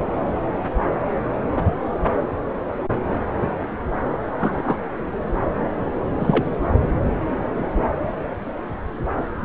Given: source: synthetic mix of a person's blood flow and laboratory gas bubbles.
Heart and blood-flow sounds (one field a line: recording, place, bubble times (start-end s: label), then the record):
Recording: Doppler ultrasound of blood flow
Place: subclavian vein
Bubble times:
4.40-4.77 s: bubbles
6.20-6.49 s: bubbles
From the record:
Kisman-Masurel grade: 122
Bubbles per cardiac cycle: 1 to 2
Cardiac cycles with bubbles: 10 to 50%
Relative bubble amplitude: moderate (0.250 to 0.450)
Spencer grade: 2 (many but less than half of the cardiac periods contain bubble signals, singularly or in groups)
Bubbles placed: anywhere in the cardiac cycle